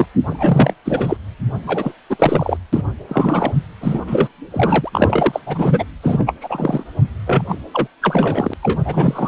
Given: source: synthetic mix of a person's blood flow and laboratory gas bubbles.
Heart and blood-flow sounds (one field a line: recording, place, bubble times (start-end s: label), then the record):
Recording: Doppler ultrasound of blood flow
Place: precordium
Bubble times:
0.00-0.06 s: bubbles
0.27-0.73 s: bubbles
0.85-1.17 s: bubbles
1.66-1.92 s: bubbles
2.10-2.17 s: bubbles
2.19-2.57 s: bubbles
2.73-2.82 s: bubbles
3.08-3.54 s: bubbles
3.80-4.02 s: bubbles
4.07-4.28 s: bubbles
4.50-4.90 s: bubbles
4.92-5.41 s: bubbles
5.46-5.85 s: bubbles
6.03-6.34 s: bubbles
6.41-6.83 s: bubbles
7.26-7.42 s: bubbles
7.49-7.58 s: bubbles
7.73-7.88 s: bubbles
8.02-8.54 s: bubbles
8.62-8.79 s: bubbles
8.85-9.28 s: bubbles
From the record:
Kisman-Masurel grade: 343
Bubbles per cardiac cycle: rolling drumbeat, 9 or more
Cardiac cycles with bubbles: 100%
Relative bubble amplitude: loud (0.450 to 0.775)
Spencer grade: 3 (all of the cardiac periods contain showers or single bubble signals, but not dominating or overriding the cardiac motion signals)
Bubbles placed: anywhere in the cardiac cycle